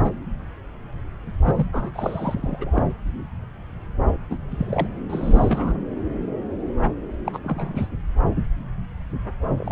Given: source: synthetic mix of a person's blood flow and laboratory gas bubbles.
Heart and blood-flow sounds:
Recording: Doppler ultrasound of blood flow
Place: subclavian vein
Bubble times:
0.00-0.11 s: bubbles
1.45-1.66 s: bubbles
1.73-1.91 s: bubbles
1.94-2.83 s: bubbles
4.29-4.38 s: bubbles
4.50-4.87 s: bubbles
5.09-5.78 s: bubbles
7.24-7.39 s: bubbles
7.44-7.88 s: bubbles
9.57-9.72 s: bubbles
From the record:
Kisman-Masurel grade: 232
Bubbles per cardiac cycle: several, 3 to 8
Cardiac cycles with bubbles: 50 to 99%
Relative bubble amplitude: moderate (0.250 to 0.450)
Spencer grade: 3 (all of the cardiac periods contain showers or single bubble signals, but not dominating or overriding the cardiac motion signals)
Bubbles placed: anywhere in the cardiac cycle

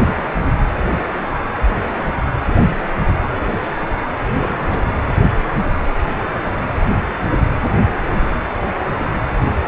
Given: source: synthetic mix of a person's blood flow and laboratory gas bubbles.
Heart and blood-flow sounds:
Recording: Doppler ultrasound of blood flow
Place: precordium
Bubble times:
4.32-4.78 s: bubbles
4.86-4.95 s: bubbles
From the record:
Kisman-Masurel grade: 212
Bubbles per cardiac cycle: several, 3 to 8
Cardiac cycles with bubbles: 1 to 10%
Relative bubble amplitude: moderate (0.250 to 0.450)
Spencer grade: 1 (occasional bubble signal discernible with the cardiac motion signal, with majority of cardiac periods free of bubbles)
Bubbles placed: anywhere in the cardiac cycle

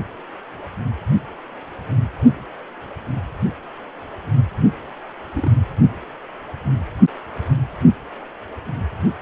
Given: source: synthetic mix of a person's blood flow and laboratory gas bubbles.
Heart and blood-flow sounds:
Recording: Doppler ultrasound of blood flow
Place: precordium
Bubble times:
5.34-5.51 s: bubbles
From the record:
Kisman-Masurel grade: 111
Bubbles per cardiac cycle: 1 to 2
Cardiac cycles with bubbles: 1 to 10%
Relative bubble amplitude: barely perceptible (0.100 to 0.250)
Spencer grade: 1 (occasional bubble signal discernible with the cardiac motion signal, with majority of cardiac periods free of bubbles)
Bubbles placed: only in the low amplitude regions of the cardiac cycle

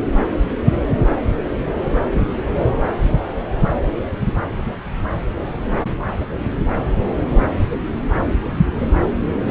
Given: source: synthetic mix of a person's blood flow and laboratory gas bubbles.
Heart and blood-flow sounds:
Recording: Doppler ultrasound of blood flow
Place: subclavian vein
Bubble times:
no bubbles
From the record:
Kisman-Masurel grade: 000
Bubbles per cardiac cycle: 0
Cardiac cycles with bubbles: 0%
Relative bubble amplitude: no bubbles discernible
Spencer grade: 0 (complete lack of bubble signals)

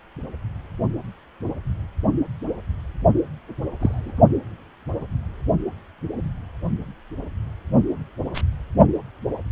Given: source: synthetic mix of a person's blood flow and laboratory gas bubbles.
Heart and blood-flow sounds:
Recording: Doppler ultrasound of blood flow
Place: precordium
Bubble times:
3.79-4.12 s: bubbles
8.34-8.42 s: bubbles
From the record:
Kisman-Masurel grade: 122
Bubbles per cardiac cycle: 1 to 2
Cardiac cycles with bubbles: 10 to 50%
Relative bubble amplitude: moderate (0.250 to 0.450)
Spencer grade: 2 (many but less than half of the cardiac periods contain bubble signals, singularly or in groups)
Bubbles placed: only in the low amplitude regions of the cardiac cycle

